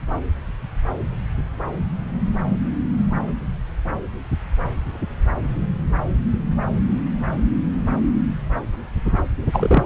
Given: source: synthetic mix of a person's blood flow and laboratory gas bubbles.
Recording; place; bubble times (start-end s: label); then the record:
Doppler ultrasound of blood flow; subclavian vein
9.52-9.86 s: bubbles
From the record:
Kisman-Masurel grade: 213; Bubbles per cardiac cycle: several, 3 to 8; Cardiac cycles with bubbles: 1 to 10%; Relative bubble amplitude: loud (0.450 to 0.775); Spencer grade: 1 (occasional bubble signal discernible with the cardiac motion signal, with majority of cardiac periods free of bubbles); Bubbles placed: anywhere in the cardiac cycle